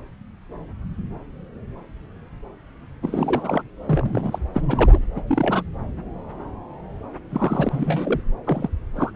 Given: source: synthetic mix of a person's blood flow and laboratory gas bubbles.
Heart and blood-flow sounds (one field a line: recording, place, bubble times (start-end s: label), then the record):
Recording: Doppler ultrasound of blood flow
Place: subclavian vein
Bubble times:
3.02-3.62 s: bubbles
3.85-4.47 s: bubbles
4.53-4.61 s: bubbles
4.68-4.98 s: bubbles
5.15-5.20 s: bubbles
5.27-5.61 s: bubbles
7.31-8.20 s: bubbles
8.46-8.69 s: bubbles
8.96-9.11 s: bubbles
From the record:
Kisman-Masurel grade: 222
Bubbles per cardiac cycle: several, 3 to 8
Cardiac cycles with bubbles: 10 to 50%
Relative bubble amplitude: moderate (0.250 to 0.450)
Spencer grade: 2 (many but less than half of the cardiac periods contain bubble signals, singularly or in groups)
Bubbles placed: anywhere in the cardiac cycle